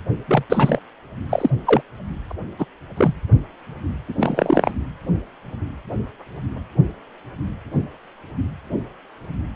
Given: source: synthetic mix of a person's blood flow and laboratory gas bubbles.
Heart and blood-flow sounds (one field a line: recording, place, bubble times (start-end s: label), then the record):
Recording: Doppler ultrasound of blood flow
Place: precordium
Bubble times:
0.27-0.43 s: bubbles
0.49-0.79 s: bubbles
1.29-1.50 s: bubbles
1.65-1.81 s: bubbles
2.29-2.33 s: bubbles
2.59-2.66 s: bubbles
2.97-3.14 s: bubbles
4.08-4.13 s: bubbles
4.20-4.71 s: bubbles
From the record:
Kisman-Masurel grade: 223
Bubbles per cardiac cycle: several, 3 to 8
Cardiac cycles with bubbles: 10 to 50%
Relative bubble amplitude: loud (0.450 to 0.775)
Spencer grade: 2 (many but less than half of the cardiac periods contain bubble signals, singularly or in groups)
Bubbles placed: anywhere in the cardiac cycle